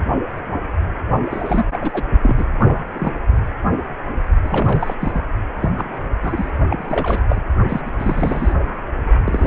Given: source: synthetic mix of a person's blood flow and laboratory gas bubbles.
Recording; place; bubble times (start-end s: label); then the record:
Doppler ultrasound of blood flow; precordium
1.30-1.65 s: bubbles
1.73-2.08 s: bubbles
2.21-2.45 s: bubbles
2.59-2.83 s: bubbles
2.94-3.12 s: bubbles
3.15-3.19 s: bubbles
4.44-4.96 s: bubbles
5.00-5.21 s: bubbles
5.59-5.70 s: bubbles
5.77-6.11 s: bubbles
6.22-6.51 s: bubbles
6.70-7.23 s: bubbles
7.28-7.41 s: bubbles
7.68-7.81 s: bubbles
7.85-7.90 s: bubbles
7.99-8.54 s: bubbles
9.24-9.47 s: bubbles
From the record:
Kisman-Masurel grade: 332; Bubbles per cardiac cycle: rolling drumbeat, 9 or more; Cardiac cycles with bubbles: 50 to 99%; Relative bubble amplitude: moderate (0.250 to 0.450); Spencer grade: 3 (all of the cardiac periods contain showers or single bubble signals, but not dominating or overriding the cardiac motion signals); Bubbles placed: only in the low amplitude regions of the cardiac cycle